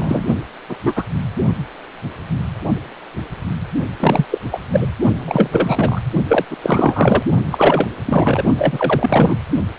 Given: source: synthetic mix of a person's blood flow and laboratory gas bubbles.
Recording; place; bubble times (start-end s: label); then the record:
Doppler ultrasound of blood flow; precordium
0.00-0.41 s: bubbles
0.69-0.76 s: bubbles
0.85-1.03 s: bubbles
4.00-4.25 s: bubbles
4.31-4.39 s: bubbles
4.51-4.58 s: bubbles
4.73-4.87 s: bubbles
5.16-6.02 s: bubbles
6.29-6.45 s: bubbles
6.50-6.56 s: bubbles
6.62-7.23 s: bubbles
7.52-7.89 s: bubbles
8.06-8.43 s: bubbles
8.58-9.37 s: bubbles
From the record:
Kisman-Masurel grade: 333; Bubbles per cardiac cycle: rolling drumbeat, 9 or more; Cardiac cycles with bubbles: 50 to 99%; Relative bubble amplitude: loud (0.450 to 0.775); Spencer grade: 3 (all of the cardiac periods contain showers or single bubble signals, but not dominating or overriding the cardiac motion signals); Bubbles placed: only in the low amplitude regions of the cardiac cycle